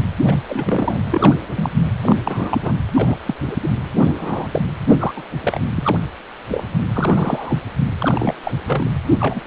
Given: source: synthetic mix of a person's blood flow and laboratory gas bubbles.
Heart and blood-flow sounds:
Doppler ultrasound of blood flow; precordium
0.00-0.02 s: bubbles
0.27-0.36 s: bubbles
0.49-0.99 s: bubbles
1.05-1.34 s: bubbles
1.56-1.72 s: bubbles
2.01-2.16 s: bubbles
2.25-2.74 s: bubbles
2.95-3.19 s: bubbles
3.25-3.34 s: bubbles
3.47-3.56 s: bubbles
3.62-3.69 s: bubbles
3.99-4.48 s: bubbles
4.51-4.62 s: bubbles
4.89-5.14 s: bubbles
5.16-5.23 s: bubbles
5.42-5.60 s: bubbles
5.75-5.98 s: bubbles
6.51-6.64 s: bubbles
6.94-7.61 s: bubbles
7.99-8.34 s: bubbles
8.44-8.52 s: bubbles
8.66-8.90 s: bubbles
9.20-9.41 s: bubbles
From the record:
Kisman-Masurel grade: 242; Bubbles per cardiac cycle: several, 3 to 8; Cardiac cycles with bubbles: 100%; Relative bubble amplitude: moderate (0.250 to 0.450); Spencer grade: 3 (all of the cardiac periods contain showers or single bubble signals, but not dominating or overriding the cardiac motion signals); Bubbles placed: anywhere in the cardiac cycle

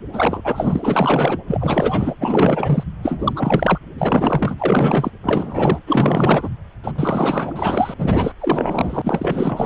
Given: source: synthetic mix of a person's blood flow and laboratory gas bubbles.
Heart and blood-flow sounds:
Doppler ultrasound of blood flow; precordium
0.12-0.42 s: bubbles
0.44-1.38 s: bubbles
1.47-2.14 s: bubbles
2.19-2.83 s: bubbles
3.02-3.33 s: bubbles
3.35-3.78 s: bubbles
3.98-4.55 s: bubbles
4.58-5.12 s: bubbles
5.23-5.79 s: bubbles
5.87-6.50 s: bubbles
6.83-6.92 s: bubbles
6.96-7.94 s: bubbles
7.98-8.32 s: bubbles
8.38-9.66 s: bubbles
From the record:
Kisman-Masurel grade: 444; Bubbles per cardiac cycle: continuous sound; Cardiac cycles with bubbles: 100%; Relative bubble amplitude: maximal (0.775 to 0.999); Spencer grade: 4 (maximum detectable bubble signal sounding continuously throughout systole and diastole of every cardiac period, and overriding the amplitude of the normal cardiac signals); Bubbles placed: anywhere in the cardiac cycle

